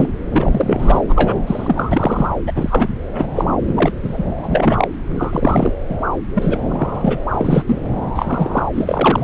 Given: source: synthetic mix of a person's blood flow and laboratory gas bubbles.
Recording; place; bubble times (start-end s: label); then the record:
Doppler ultrasound of blood flow; subclavian vein
0.00-0.09 s: bubbles
0.30-0.99 s: bubbles
1.08-1.36 s: bubbles
1.46-2.35 s: bubbles
2.46-2.52 s: bubbles
2.55-2.93 s: bubbles
3.08-3.45 s: bubbles
3.67-3.91 s: bubbles
4.02-4.23 s: bubbles
4.43-4.88 s: bubbles
5.15-5.72 s: bubbles
5.89-5.98 s: bubbles
6.35-6.60 s: bubbles
6.69-7.26 s: bubbles
7.32-7.63 s: bubbles
7.67-7.82 s: bubbles
8.15-8.65 s: bubbles
8.75-9.24 s: bubbles
From the record:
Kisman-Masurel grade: 243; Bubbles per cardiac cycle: several, 3 to 8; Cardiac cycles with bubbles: 100%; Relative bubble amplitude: loud (0.450 to 0.775); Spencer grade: 3 (all of the cardiac periods contain showers or single bubble signals, but not dominating or overriding the cardiac motion signals); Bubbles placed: anywhere in the cardiac cycle